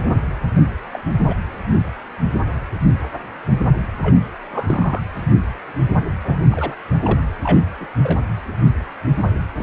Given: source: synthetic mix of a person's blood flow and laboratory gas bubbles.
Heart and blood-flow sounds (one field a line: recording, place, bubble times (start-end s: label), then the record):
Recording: Doppler ultrasound of blood flow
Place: precordium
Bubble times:
0.93-0.99 s: bubbles
1.20-1.34 s: bubbles
4.02-4.21 s: bubbles
4.51-5.00 s: bubbles
6.23-6.76 s: bubbles
7.03-7.20 s: bubbles
7.43-7.65 s: bubbles
7.80-7.87 s: bubbles
8.03-8.21 s: bubbles
9.58-9.63 s: bubbles
From the record:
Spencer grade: 2 (many but less than half of the cardiac periods contain bubble signals, singularly or in groups)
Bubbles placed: anywhere in the cardiac cycle